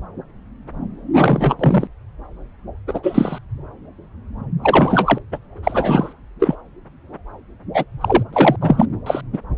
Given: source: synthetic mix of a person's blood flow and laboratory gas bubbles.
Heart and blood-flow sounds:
Doppler ultrasound of blood flow; subclavian vein
1.16-1.55 s: bubbles
1.59-1.88 s: bubbles
2.87-3.00 s: bubbles
3.03-3.38 s: bubbles
4.62-5.19 s: bubbles
5.32-5.38 s: bubbles
5.62-6.13 s: bubbles
6.40-6.55 s: bubbles
7.74-7.85 s: bubbles
8.01-8.23 s: bubbles
8.33-8.56 s: bubbles
8.61-8.86 s: bubbles
9.06-9.21 s: bubbles
9.33-9.38 s: bubbles
From the record:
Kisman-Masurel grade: 233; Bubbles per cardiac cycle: several, 3 to 8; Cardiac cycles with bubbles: 50 to 99%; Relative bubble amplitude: loud (0.450 to 0.775); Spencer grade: 3 (all of the cardiac periods contain showers or single bubble signals, but not dominating or overriding the cardiac motion signals); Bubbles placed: anywhere in the cardiac cycle

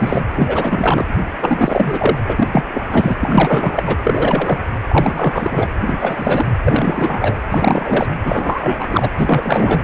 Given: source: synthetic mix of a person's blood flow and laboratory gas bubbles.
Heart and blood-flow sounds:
Doppler ultrasound of blood flow; precordium
0.00-0.22 s: bubbles
0.36-1.04 s: bubbles
1.40-2.18 s: bubbles
2.27-2.48 s: bubbles
2.52-2.64 s: bubbles
2.73-3.14 s: bubbles
3.21-3.83 s: bubbles
3.86-3.97 s: bubbles
4.03-4.59 s: bubbles
4.88-5.69 s: bubbles
5.86-6.49 s: bubbles
6.63-7.36 s: bubbles
7.50-8.06 s: bubbles
8.24-9.10 s: bubbles
9.14-9.82 s: bubbles
From the record:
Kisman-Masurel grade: 343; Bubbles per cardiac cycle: rolling drumbeat, 9 or more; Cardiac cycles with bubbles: 100%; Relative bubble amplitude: loud (0.450 to 0.775); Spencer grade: 3 (all of the cardiac periods contain showers or single bubble signals, but not dominating or overriding the cardiac motion signals); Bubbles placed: anywhere in the cardiac cycle

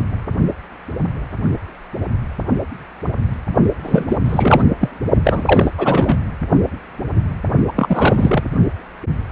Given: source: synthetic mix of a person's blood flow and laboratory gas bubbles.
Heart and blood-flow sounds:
Doppler ultrasound of blood flow; precordium
3.82-4.19 s: bubbles
4.24-4.65 s: bubbles
4.81-4.90 s: bubbles
5.24-5.71 s: bubbles
5.78-6.19 s: bubbles
7.67-7.73 s: bubbles
7.75-8.43 s: bubbles
From the record:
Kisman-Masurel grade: 333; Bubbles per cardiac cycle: rolling drumbeat, 9 or more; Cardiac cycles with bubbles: 50 to 99%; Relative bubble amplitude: loud (0.450 to 0.775); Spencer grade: 3 (all of the cardiac periods contain showers or single bubble signals, but not dominating or overriding the cardiac motion signals); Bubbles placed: only in the low amplitude regions of the cardiac cycle

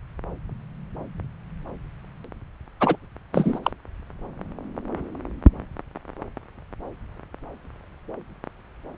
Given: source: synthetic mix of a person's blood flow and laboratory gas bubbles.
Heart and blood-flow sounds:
Doppler ultrasound of blood flow; subclavian vein
2.80-2.96 s: bubbles
3.33-3.59 s: bubbles
3.63-3.72 s: bubbles
From the record:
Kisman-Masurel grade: 222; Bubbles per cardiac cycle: several, 3 to 8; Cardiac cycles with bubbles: 10 to 50%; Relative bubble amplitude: moderate (0.250 to 0.450); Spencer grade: 2 (many but less than half of the cardiac periods contain bubble signals, singularly or in groups); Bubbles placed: anywhere in the cardiac cycle

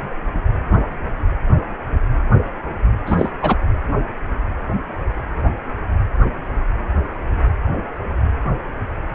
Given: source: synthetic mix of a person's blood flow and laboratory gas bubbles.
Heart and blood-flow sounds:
Doppler ultrasound of blood flow; precordium
3.06-3.31 s: bubbles
3.42-3.56 s: bubbles
From the record:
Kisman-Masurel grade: 213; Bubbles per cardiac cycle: several, 3 to 8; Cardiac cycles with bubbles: 1 to 10%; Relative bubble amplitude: loud (0.450 to 0.775); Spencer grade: 1 (occasional bubble signal discernible with the cardiac motion signal, with majority of cardiac periods free of bubbles); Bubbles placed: anywhere in the cardiac cycle

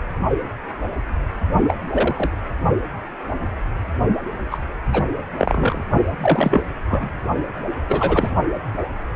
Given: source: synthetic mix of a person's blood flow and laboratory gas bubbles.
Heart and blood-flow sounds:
Doppler ultrasound of blood flow; precordium
1.67-1.74 s: bubbles
1.92-2.30 s: bubbles
4.51-4.58 s: bubbles
4.93-5.04 s: bubbles
5.37-5.84 s: bubbles
6.21-6.62 s: bubbles
6.89-7.12 s: bubbles
7.89-8.30 s: bubbles
From the record:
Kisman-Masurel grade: 223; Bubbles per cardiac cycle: several, 3 to 8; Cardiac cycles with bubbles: 10 to 50%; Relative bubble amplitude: loud (0.450 to 0.775); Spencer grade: 2 (many but less than half of the cardiac periods contain bubble signals, singularly or in groups); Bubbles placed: only in the low amplitude regions of the cardiac cycle

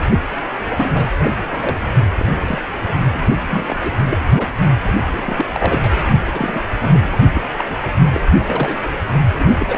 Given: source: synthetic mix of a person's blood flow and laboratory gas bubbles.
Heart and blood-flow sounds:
Doppler ultrasound of blood flow; precordium
0.77-1.07 s: bubbles
1.17-1.31 s: bubbles
1.42-1.77 s: bubbles
2.14-2.23 s: bubbles
2.46-2.59 s: bubbles
3.14-3.19 s: bubbles
3.50-3.77 s: bubbles
3.81-3.96 s: bubbles
4.10-4.17 s: bubbles
4.37-4.46 s: bubbles
5.06-5.46 s: bubbles
5.52-5.79 s: bubbles
5.83-5.90 s: bubbles
6.32-7.17 s: bubbles
7.34-7.42 s: bubbles
7.57-7.64 s: bubbles
7.70-7.75 s: bubbles
7.98-8.09 s: bubbles
8.12-8.21 s: bubbles
8.47-8.79 s: bubbles
9.39-9.78 s: bubbles
From the record:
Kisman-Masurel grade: 242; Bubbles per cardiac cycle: several, 3 to 8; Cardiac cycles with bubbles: 100%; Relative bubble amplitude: moderate (0.250 to 0.450); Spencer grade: 3 (all of the cardiac periods contain showers or single bubble signals, but not dominating or overriding the cardiac motion signals); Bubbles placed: only in the low amplitude regions of the cardiac cycle

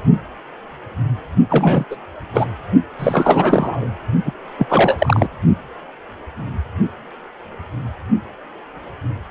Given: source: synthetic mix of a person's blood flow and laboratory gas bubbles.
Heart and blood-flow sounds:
Doppler ultrasound of blood flow; precordium
1.50-1.84 s: bubbles
1.90-1.96 s: bubbles
2.33-2.45 s: bubbles
2.99-3.89 s: bubbles
4.25-4.33 s: bubbles
4.58-5.28 s: bubbles
From the record:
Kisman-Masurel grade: 333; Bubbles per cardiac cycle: rolling drumbeat, 9 or more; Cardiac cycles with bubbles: 50 to 99%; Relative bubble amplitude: loud (0.450 to 0.775); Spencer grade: 3 (all of the cardiac periods contain showers or single bubble signals, but not dominating or overriding the cardiac motion signals); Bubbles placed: only in the low amplitude regions of the cardiac cycle

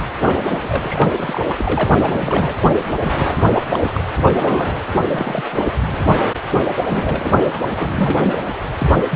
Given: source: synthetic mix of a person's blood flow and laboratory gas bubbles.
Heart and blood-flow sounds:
Doppler ultrasound of blood flow; precordium
0.22-1.44 s: bubbles
1.49-1.56 s: bubbles
1.58-1.90 s: bubbles
1.94-2.56 s: bubbles
3.01-3.48 s: bubbles
3.57-4.01 s: bubbles
4.17-4.80 s: bubbles
5.10-5.45 s: bubbles
5.51-5.69 s: bubbles
6.89-7.41 s: bubbles
7.44-7.51 s: bubbles
7.75-8.38 s: bubbles
8.78-8.94 s: bubbles
9.11-9.16 s: bubbles
From the record:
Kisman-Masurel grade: 332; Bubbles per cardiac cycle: rolling drumbeat, 9 or more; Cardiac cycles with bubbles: 50 to 99%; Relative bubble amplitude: moderate (0.250 to 0.450); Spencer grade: 3 (all of the cardiac periods contain showers or single bubble signals, but not dominating or overriding the cardiac motion signals); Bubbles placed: anywhere in the cardiac cycle

